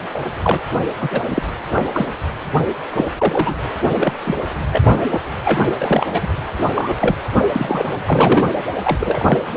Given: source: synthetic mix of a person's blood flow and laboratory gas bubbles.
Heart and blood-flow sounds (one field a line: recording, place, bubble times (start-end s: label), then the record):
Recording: Doppler ultrasound of blood flow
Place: precordium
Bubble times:
0.14-0.19 s: bubbles
0.43-0.60 s: bubbles
1.00-1.21 s: bubbles
1.30-1.43 s: bubbles
1.76-1.85 s: bubbles
1.94-2.06 s: bubbles
2.91-3.08 s: bubbles
3.18-3.54 s: bubbles
3.94-4.13 s: bubbles
4.23-4.35 s: bubbles
4.72-5.06 s: bubbles
5.10-5.20 s: bubbles
5.44-5.59 s: bubbles
5.79-6.20 s: bubbles
6.22-6.28 s: bubbles
6.58-6.65 s: bubbles
6.74-6.95 s: bubbles
7.00-7.16 s: bubbles
7.55-7.85 s: bubbles
8.06-8.49 s: bubbles
8.83-9.38 s: bubbles
From the record:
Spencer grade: 3 (all of the cardiac periods contain showers or single bubble signals, but not dominating or overriding the cardiac motion signals)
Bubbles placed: anywhere in the cardiac cycle